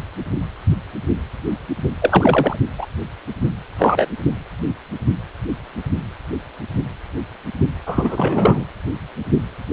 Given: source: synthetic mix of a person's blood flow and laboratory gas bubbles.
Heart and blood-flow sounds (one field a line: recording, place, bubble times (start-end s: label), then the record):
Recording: Doppler ultrasound of blood flow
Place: precordium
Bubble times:
2.02-2.56 s: bubbles
2.79-2.86 s: bubbles
3.78-4.08 s: bubbles
7.86-8.65 s: bubbles
From the record:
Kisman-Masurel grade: 223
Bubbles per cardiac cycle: several, 3 to 8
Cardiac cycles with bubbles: 10 to 50%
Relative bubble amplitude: loud (0.450 to 0.775)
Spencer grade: 2 (many but less than half of the cardiac periods contain bubble signals, singularly or in groups)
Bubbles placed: anywhere in the cardiac cycle